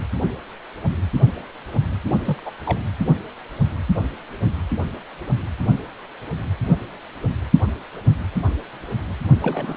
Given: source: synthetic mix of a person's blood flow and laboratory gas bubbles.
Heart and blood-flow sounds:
Doppler ultrasound of blood flow; precordium
2.04-2.43 s: bubbles
2.46-2.51 s: bubbles
2.66-2.78 s: bubbles
9.41-9.77 s: bubbles
From the record:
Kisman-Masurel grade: 221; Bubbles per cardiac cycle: several, 3 to 8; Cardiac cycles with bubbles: 10 to 50%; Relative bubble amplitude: barely perceptible (0.100 to 0.250); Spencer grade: 2 (many but less than half of the cardiac periods contain bubble signals, singularly or in groups); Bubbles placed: anywhere in the cardiac cycle

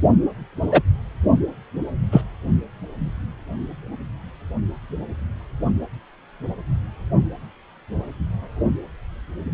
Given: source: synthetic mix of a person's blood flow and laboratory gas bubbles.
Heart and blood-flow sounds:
Doppler ultrasound of blood flow; precordium
0.71-0.82 s: bubbles
2.12-2.21 s: bubbles
From the record:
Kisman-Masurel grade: 123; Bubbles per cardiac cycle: 1 to 2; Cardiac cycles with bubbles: 10 to 50%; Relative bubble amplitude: loud (0.450 to 0.775); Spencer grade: 2 (many but less than half of the cardiac periods contain bubble signals, singularly or in groups); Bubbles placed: only in the low amplitude regions of the cardiac cycle

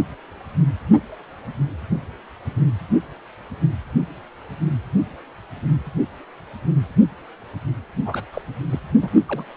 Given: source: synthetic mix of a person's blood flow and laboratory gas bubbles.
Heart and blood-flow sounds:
Doppler ultrasound of blood flow; precordium
8.04-8.22 s: bubbles
8.32-8.42 s: bubbles
8.70-8.79 s: bubbles
9.02-9.10 s: bubbles
9.28-9.45 s: bubbles
From the record:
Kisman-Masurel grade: 221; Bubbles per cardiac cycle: several, 3 to 8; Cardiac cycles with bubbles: 10 to 50%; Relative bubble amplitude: barely perceptible (0.100 to 0.250); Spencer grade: 2 (many but less than half of the cardiac periods contain bubble signals, singularly or in groups); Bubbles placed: only in the low amplitude regions of the cardiac cycle

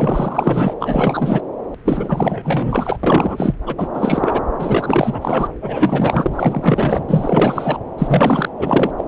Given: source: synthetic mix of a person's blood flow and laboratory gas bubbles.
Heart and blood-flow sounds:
Doppler ultrasound of blood flow; subclavian vein
0.00-0.74 s: bubbles
0.80-1.41 s: bubbles
1.84-2.97 s: bubbles
3.03-3.53 s: bubbles
3.66-3.74 s: bubbles
3.77-3.88 s: bubbles
3.94-4.43 s: bubbles
4.59-5.47 s: bubbles
5.61-7.04 s: bubbles
7.08-7.79 s: bubbles
7.98-8.49 s: bubbles
8.59-8.91 s: bubbles
8.97-9.04 s: bubbles
From the record:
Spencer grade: 4 (maximum detectable bubble signal sounding continuously throughout systole and diastole of every cardiac period, and overriding the amplitude of the normal cardiac signals); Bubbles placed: anywhere in the cardiac cycle

